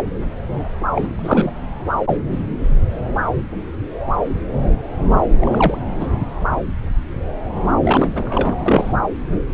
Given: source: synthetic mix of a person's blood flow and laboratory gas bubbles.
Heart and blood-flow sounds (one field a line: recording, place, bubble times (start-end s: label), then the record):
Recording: Doppler ultrasound of blood flow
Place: subclavian vein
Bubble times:
0.95-1.08 s: bubbles
1.14-1.51 s: bubbles
5.40-5.78 s: bubbles
6.00-6.07 s: bubbles
7.83-8.08 s: bubbles
8.15-8.55 s: bubbles
8.66-8.93 s: bubbles
From the record:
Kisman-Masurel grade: 222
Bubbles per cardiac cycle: several, 3 to 8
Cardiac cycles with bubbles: 10 to 50%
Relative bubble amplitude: moderate (0.250 to 0.450)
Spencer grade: 2 (many but less than half of the cardiac periods contain bubble signals, singularly or in groups)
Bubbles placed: anywhere in the cardiac cycle